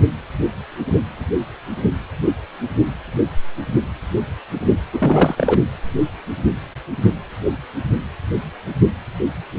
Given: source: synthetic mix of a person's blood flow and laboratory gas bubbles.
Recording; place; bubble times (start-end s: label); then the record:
Doppler ultrasound of blood flow; precordium
4.92-5.59 s: bubbles
From the record:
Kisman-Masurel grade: 213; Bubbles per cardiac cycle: several, 3 to 8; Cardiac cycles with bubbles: 1 to 10%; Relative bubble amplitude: loud (0.450 to 0.775); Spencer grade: 1 (occasional bubble signal discernible with the cardiac motion signal, with majority of cardiac periods free of bubbles); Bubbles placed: anywhere in the cardiac cycle